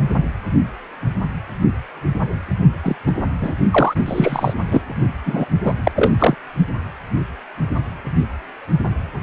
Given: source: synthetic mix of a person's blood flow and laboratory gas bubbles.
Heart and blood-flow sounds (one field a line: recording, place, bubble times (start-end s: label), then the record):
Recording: Doppler ultrasound of blood flow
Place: precordium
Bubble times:
2.83-2.96 s: bubbles
3.05-3.12 s: bubbles
3.41-3.53 s: bubbles
3.71-3.95 s: bubbles
4.06-4.54 s: bubbles
4.71-4.82 s: bubbles
5.25-5.46 s: bubbles
5.63-5.74 s: bubbles
5.83-5.92 s: bubbles
5.95-6.12 s: bubbles
6.19-6.35 s: bubbles
From the record:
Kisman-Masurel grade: 223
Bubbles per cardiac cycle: several, 3 to 8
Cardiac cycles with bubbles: 10 to 50%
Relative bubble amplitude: loud (0.450 to 0.775)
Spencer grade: 2 (many but less than half of the cardiac periods contain bubble signals, singularly or in groups)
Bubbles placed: only in the low amplitude regions of the cardiac cycle